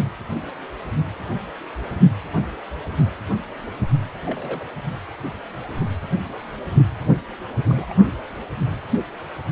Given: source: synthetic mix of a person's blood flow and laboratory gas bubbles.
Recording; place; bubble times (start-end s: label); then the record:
Doppler ultrasound of blood flow; precordium
4.26-4.65 s: bubbles
7.12-7.21 s: bubbles
7.69-7.94 s: bubbles
From the record:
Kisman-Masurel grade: 121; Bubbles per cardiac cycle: 1 to 2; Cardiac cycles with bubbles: 10 to 50%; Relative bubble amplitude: barely perceptible (0.100 to 0.250); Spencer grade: 2 (many but less than half of the cardiac periods contain bubble signals, singularly or in groups); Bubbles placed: only in the low amplitude regions of the cardiac cycle